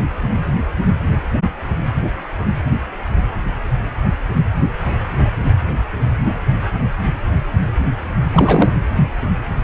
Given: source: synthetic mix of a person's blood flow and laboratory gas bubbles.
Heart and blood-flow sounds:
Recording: Doppler ultrasound of blood flow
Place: precordium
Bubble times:
8.31-8.71 s: bubbles
From the record:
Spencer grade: 1 (occasional bubble signal discernible with the cardiac motion signal, with majority of cardiac periods free of bubbles)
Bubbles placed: anywhere in the cardiac cycle

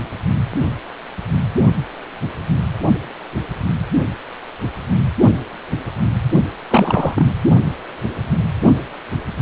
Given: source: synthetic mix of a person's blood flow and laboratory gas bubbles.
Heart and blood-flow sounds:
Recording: Doppler ultrasound of blood flow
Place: precordium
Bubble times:
6.71-7.26 s: bubbles
From the record:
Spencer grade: 1 (occasional bubble signal discernible with the cardiac motion signal, with majority of cardiac periods free of bubbles)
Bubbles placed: only in the low amplitude regions of the cardiac cycle

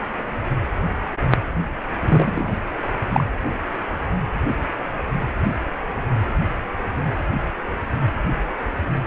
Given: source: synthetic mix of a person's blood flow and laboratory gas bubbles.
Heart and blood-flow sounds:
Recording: Doppler ultrasound of blood flow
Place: precordium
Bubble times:
2.01-2.55 s: bubbles
3.13-3.24 s: bubbles
From the record:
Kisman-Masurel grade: 213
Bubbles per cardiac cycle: several, 3 to 8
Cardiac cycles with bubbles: 1 to 10%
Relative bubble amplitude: loud (0.450 to 0.775)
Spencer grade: 1 (occasional bubble signal discernible with the cardiac motion signal, with majority of cardiac periods free of bubbles)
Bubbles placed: anywhere in the cardiac cycle

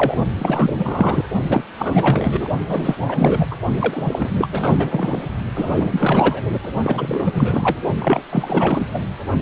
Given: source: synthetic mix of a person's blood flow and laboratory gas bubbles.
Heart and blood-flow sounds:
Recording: Doppler ultrasound of blood flow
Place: precordium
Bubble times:
0.00-0.16 s: bubbles
0.38-1.25 s: bubbles
1.42-1.63 s: bubbles
1.79-2.48 s: bubbles
2.68-2.96 s: bubbles
3.04-3.47 s: bubbles
3.50-3.56 s: bubbles
3.77-4.30 s: bubbles
4.38-5.22 s: bubbles
5.54-6.42 s: bubbles
6.62-6.72 s: bubbles
6.76-7.78 s: bubbles
7.99-8.21 s: bubbles
8.29-8.87 s: bubbles
8.94-9.00 s: bubbles
From the record:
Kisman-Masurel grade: 444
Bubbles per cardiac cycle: continuous sound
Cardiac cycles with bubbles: 100%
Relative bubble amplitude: maximal (0.775 to 0.999)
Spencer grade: 4 (maximum detectable bubble signal sounding continuously throughout systole and diastole of every cardiac period, and overriding the amplitude of the normal cardiac signals)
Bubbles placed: only in the low amplitude regions of the cardiac cycle

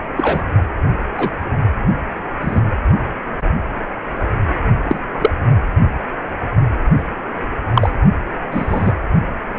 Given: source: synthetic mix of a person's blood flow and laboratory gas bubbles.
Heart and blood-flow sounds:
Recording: Doppler ultrasound of blood flow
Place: precordium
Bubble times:
0.16-0.43 s: bubbles
1.15-1.31 s: bubbles
2.41-2.62 s: bubbles
4.88-5.01 s: bubbles
5.21-5.30 s: bubbles
7.74-7.91 s: bubbles
8.51-8.92 s: bubbles
From the record:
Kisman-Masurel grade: 123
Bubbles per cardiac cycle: 1 to 2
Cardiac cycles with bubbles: 10 to 50%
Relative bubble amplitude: loud (0.450 to 0.775)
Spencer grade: 2 (many but less than half of the cardiac periods contain bubble signals, singularly or in groups)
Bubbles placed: only in the low amplitude regions of the cardiac cycle

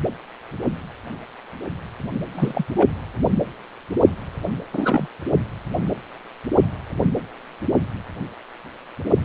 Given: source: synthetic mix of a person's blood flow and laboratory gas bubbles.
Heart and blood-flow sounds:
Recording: Doppler ultrasound of blood flow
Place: precordium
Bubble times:
2.32-2.67 s: bubbles
2.76-2.88 s: bubbles
4.73-5.07 s: bubbles
From the record:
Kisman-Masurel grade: 212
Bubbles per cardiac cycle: several, 3 to 8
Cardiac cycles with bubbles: 1 to 10%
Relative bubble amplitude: moderate (0.250 to 0.450)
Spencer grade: 1 (occasional bubble signal discernible with the cardiac motion signal, with majority of cardiac periods free of bubbles)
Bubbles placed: anywhere in the cardiac cycle

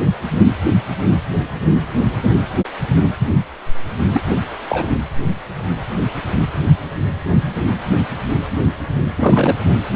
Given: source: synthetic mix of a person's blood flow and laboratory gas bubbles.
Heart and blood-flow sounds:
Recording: Doppler ultrasound of blood flow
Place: precordium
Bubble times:
4.14-4.22 s: bubbles
4.69-4.88 s: bubbles
9.16-9.58 s: bubbles
9.64-9.71 s: bubbles
From the record:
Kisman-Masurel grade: 222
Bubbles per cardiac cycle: several, 3 to 8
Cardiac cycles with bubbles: 10 to 50%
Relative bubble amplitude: moderate (0.250 to 0.450)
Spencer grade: 2 (many but less than half of the cardiac periods contain bubble signals, singularly or in groups)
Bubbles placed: anywhere in the cardiac cycle

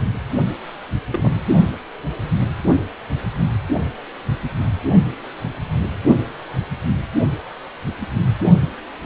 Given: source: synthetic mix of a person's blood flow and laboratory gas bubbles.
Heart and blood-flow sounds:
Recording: Doppler ultrasound of blood flow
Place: precordium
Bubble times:
1.10-1.37 s: bubbles
From the record:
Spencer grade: 1 (occasional bubble signal discernible with the cardiac motion signal, with majority of cardiac periods free of bubbles)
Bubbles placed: only in the low amplitude regions of the cardiac cycle

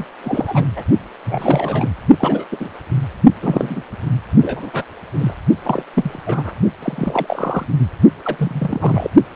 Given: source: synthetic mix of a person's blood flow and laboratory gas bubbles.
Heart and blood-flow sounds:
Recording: Doppler ultrasound of blood flow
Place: precordium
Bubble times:
0.00-0.05 s: bubbles
0.23-0.65 s: bubbles
0.76-0.83 s: bubbles
1.24-1.90 s: bubbles
2.19-2.44 s: bubbles
2.52-2.57 s: bubbles
2.60-2.69 s: bubbles
3.42-3.83 s: bubbles
4.41-4.71 s: bubbles
4.73-4.84 s: bubbles
5.19-5.33 s: bubbles
5.64-5.83 s: bubbles
5.94-6.22 s: bubbles
6.26-6.54 s: bubbles
6.83-7.66 s: bubbles
8.24-9.10 s: bubbles
From the record:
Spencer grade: 3 (all of the cardiac periods contain showers or single bubble signals, but not dominating or overriding the cardiac motion signals)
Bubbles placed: only in the low amplitude regions of the cardiac cycle

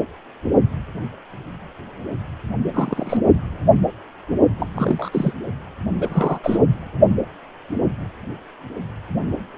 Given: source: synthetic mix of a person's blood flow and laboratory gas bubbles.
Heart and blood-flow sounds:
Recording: Doppler ultrasound of blood flow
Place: precordium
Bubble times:
2.73-3.20 s: bubbles
4.58-5.09 s: bubbles
5.12-5.33 s: bubbles
6.00-6.39 s: bubbles
6.43-6.58 s: bubbles
From the record:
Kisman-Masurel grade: 222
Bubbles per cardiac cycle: several, 3 to 8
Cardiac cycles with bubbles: 10 to 50%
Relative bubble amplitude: moderate (0.250 to 0.450)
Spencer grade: 2 (many but less than half of the cardiac periods contain bubble signals, singularly or in groups)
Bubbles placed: only in the low amplitude regions of the cardiac cycle

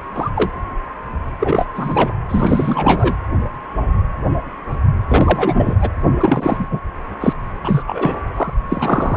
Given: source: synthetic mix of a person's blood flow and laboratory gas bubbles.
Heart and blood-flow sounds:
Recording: Doppler ultrasound of blood flow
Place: precordium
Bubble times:
0.00-0.02 s: bubbles
0.14-0.30 s: bubbles
0.35-0.51 s: bubbles
1.40-1.66 s: bubbles
1.75-2.11 s: bubbles
2.28-3.15 s: bubbles
5.08-5.76 s: bubbles
5.81-5.89 s: bubbles
6.20-6.67 s: bubbles
6.70-6.80 s: bubbles
7.20-7.33 s: bubbles
7.64-7.83 s: bubbles
7.87-8.23 s: bubbles
8.37-8.53 s: bubbles
8.71-9.16 s: bubbles
From the record:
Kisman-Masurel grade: 332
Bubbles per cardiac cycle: rolling drumbeat, 9 or more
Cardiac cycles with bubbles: 50 to 99%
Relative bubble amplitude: moderate (0.250 to 0.450)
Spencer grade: 3 (all of the cardiac periods contain showers or single bubble signals, but not dominating or overriding the cardiac motion signals)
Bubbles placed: anywhere in the cardiac cycle

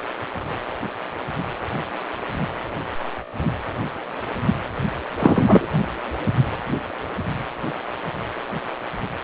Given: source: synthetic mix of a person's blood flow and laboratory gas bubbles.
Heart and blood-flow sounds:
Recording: Doppler ultrasound of blood flow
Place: precordium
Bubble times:
5.19-5.68 s: bubbles
From the record:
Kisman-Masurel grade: 213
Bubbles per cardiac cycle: several, 3 to 8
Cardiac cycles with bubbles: 1 to 10%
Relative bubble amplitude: loud (0.450 to 0.775)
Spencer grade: 1 (occasional bubble signal discernible with the cardiac motion signal, with majority of cardiac periods free of bubbles)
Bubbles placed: anywhere in the cardiac cycle

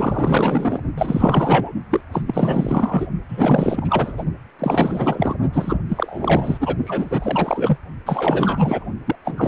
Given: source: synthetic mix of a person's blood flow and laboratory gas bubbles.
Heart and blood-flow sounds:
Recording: Doppler ultrasound of blood flow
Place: precordium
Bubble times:
0.00-0.80 s: bubbles
0.97-1.73 s: bubbles
1.90-2.01 s: bubbles
2.11-2.23 s: bubbles
2.26-3.07 s: bubbles
3.28-4.13 s: bubbles
4.16-4.23 s: bubbles
4.58-5.36 s: bubbles
5.53-5.78 s: bubbles
5.89-6.77 s: bubbles
6.86-7.78 s: bubbles
8.06-8.85 s: bubbles
9.05-9.15 s: bubbles
9.24-9.48 s: bubbles
From the record:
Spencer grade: 4 (maximum detectable bubble signal sounding continuously throughout systole and diastole of every cardiac period, and overriding the amplitude of the normal cardiac signals)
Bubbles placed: only in the low amplitude regions of the cardiac cycle

